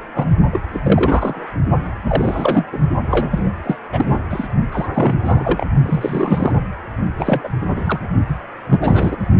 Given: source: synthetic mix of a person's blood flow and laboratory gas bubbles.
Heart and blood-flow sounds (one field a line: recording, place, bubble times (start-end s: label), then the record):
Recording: Doppler ultrasound of blood flow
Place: precordium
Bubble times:
0.15-0.25 s: bubbles
0.51-0.61 s: bubbles
0.73-0.80 s: bubbles
0.83-1.46 s: bubbles
2.03-2.65 s: bubbles
2.72-2.79 s: bubbles
3.03-3.51 s: bubbles
3.63-3.76 s: bubbles
3.92-4.18 s: bubbles
4.30-4.47 s: bubbles
4.71-4.88 s: bubbles
4.93-5.16 s: bubbles
5.25-5.66 s: bubbles
5.85-6.61 s: bubbles
7.18-7.48 s: bubbles
7.61-7.99 s: bubbles
8.28-8.39 s: bubbles
8.71-9.16 s: bubbles
From the record:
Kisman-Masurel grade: 342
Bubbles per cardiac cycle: rolling drumbeat, 9 or more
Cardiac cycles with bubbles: 100%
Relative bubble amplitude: moderate (0.250 to 0.450)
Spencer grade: 3 (all of the cardiac periods contain showers or single bubble signals, but not dominating or overriding the cardiac motion signals)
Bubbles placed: only in the low amplitude regions of the cardiac cycle